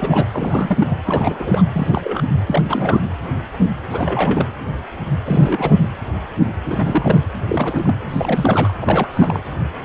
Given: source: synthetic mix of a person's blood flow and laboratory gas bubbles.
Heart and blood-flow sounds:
Doppler ultrasound of blood flow; precordium
0.00-0.27 s: bubbles
0.32-1.00 s: bubbles
1.05-1.62 s: bubbles
1.74-2.29 s: bubbles
2.46-3.01 s: bubbles
3.90-4.49 s: bubbles
5.25-5.79 s: bubbles
6.63-7.24 s: bubbles
7.49-7.96 s: bubbles
8.10-8.73 s: bubbles
8.80-9.08 s: bubbles
9.13-9.43 s: bubbles
From the record:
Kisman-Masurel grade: 332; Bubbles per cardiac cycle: rolling drumbeat, 9 or more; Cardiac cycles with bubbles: 50 to 99%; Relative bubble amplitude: moderate (0.250 to 0.450); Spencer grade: 3 (all of the cardiac periods contain showers or single bubble signals, but not dominating or overriding the cardiac motion signals); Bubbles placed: anywhere in the cardiac cycle

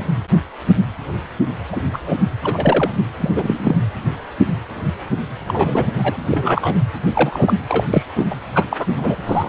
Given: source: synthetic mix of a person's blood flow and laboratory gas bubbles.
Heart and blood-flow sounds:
Doppler ultrasound of blood flow; precordium
1.72-1.81 s: bubbles
1.93-1.99 s: bubbles
2.07-2.15 s: bubbles
2.43-2.92 s: bubbles
3.20-3.30 s: bubbles
3.36-3.74 s: bubbles
5.48-5.92 s: bubbles
5.96-6.17 s: bubbles
6.27-6.77 s: bubbles
7.13-7.54 s: bubbles
7.67-7.84 s: bubbles
7.90-8.03 s: bubbles
8.15-8.26 s: bubbles
8.30-8.38 s: bubbles
8.54-8.64 s: bubbles
8.71-8.87 s: bubbles
8.90-9.15 s: bubbles
9.26-9.49 s: bubbles
From the record:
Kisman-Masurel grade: 233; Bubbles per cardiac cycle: several, 3 to 8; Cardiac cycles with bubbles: 50 to 99%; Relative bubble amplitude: loud (0.450 to 0.775); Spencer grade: 3 (all of the cardiac periods contain showers or single bubble signals, but not dominating or overriding the cardiac motion signals); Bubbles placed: anywhere in the cardiac cycle

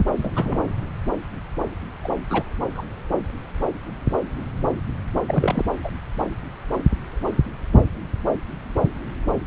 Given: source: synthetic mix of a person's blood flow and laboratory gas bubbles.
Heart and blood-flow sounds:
Doppler ultrasound of blood flow; subclavian vein
0.00-0.06 s: bubbles
0.16-0.32 s: bubbles
0.36-0.70 s: bubbles
2.04-2.08 s: bubbles
2.30-2.43 s: bubbles
2.74-2.82 s: bubbles
5.27-5.65 s: bubbles
5.83-5.91 s: bubbles
From the record:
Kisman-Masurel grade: 222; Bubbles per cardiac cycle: several, 3 to 8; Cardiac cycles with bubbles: 10 to 50%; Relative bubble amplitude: moderate (0.250 to 0.450); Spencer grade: 2 (many but less than half of the cardiac periods contain bubble signals, singularly or in groups); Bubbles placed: anywhere in the cardiac cycle

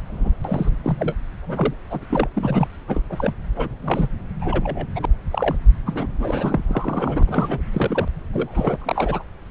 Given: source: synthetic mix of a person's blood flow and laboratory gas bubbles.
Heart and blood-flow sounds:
Doppler ultrasound of blood flow; subclavian vein
0.06-0.35 s: bubbles
0.44-0.74 s: bubbles
0.83-1.15 s: bubbles
1.43-1.74 s: bubbles
1.90-2.00 s: bubbles
2.09-2.28 s: bubbles
2.33-2.67 s: bubbles
2.88-3.02 s: bubbles
3.09-3.33 s: bubbles
3.56-3.69 s: bubbles
3.81-4.08 s: bubbles
4.41-4.87 s: bubbles
4.96-5.05 s: bubbles
5.30-5.55 s: bubbles
5.86-6.07 s: bubbles
6.18-6.63 s: bubbles
6.67-7.24 s: bubbles
7.27-7.61 s: bubbles
7.72-8.08 s: bubbles
8.33-8.76 s: bubbles
8.79-9.23 s: bubbles
From the record:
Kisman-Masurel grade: 242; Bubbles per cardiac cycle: several, 3 to 8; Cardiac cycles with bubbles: 100%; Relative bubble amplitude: moderate (0.250 to 0.450); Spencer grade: 3 (all of the cardiac periods contain showers or single bubble signals, but not dominating or overriding the cardiac motion signals); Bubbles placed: anywhere in the cardiac cycle

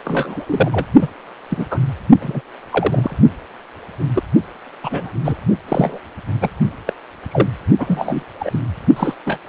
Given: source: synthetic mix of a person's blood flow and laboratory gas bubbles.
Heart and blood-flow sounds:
Doppler ultrasound of blood flow; precordium
0.05-0.85 s: bubbles
1.01-1.10 s: bubbles
1.50-1.67 s: bubbles
1.71-1.79 s: bubbles
2.19-2.41 s: bubbles
2.70-3.16 s: bubbles
4.15-4.23 s: bubbles
4.83-5.12 s: bubbles
5.24-5.37 s: bubbles
5.69-5.99 s: bubbles
6.41-6.50 s: bubbles
6.87-6.93 s: bubbles
7.31-7.48 s: bubbles
7.79-8.23 s: bubbles
8.39-8.60 s: bubbles
8.96-9.14 s: bubbles
9.26-9.39 s: bubbles
From the record:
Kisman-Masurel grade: 232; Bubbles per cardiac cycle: several, 3 to 8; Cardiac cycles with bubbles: 50 to 99%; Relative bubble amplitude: moderate (0.250 to 0.450); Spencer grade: 3 (all of the cardiac periods contain showers or single bubble signals, but not dominating or overriding the cardiac motion signals); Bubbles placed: only in the low amplitude regions of the cardiac cycle

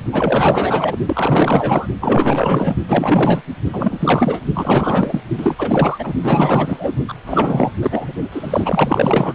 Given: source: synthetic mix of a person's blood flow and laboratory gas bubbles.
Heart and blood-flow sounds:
Doppler ultrasound of blood flow; precordium
0.12-0.96 s: bubbles
1.06-1.86 s: bubbles
2.00-2.75 s: bubbles
2.87-3.41 s: bubbles
3.72-4.40 s: bubbles
4.54-5.20 s: bubbles
5.38-6.12 s: bubbles
6.22-6.93 s: bubbles
7.08-7.14 s: bubbles
7.26-7.71 s: bubbles
7.81-8.13 s: bubbles
8.32-9.35 s: bubbles
From the record:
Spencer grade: 4 (maximum detectable bubble signal sounding continuously throughout systole and diastole of every cardiac period, and overriding the amplitude of the normal cardiac signals); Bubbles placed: only in the low amplitude regions of the cardiac cycle

